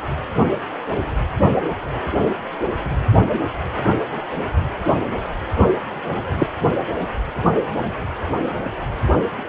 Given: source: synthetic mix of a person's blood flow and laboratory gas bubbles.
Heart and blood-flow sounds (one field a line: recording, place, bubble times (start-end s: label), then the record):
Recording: Doppler ultrasound of blood flow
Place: precordium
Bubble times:
6.38-6.47 s: bubbles
From the record:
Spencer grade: 1 (occasional bubble signal discernible with the cardiac motion signal, with majority of cardiac periods free of bubbles)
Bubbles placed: anywhere in the cardiac cycle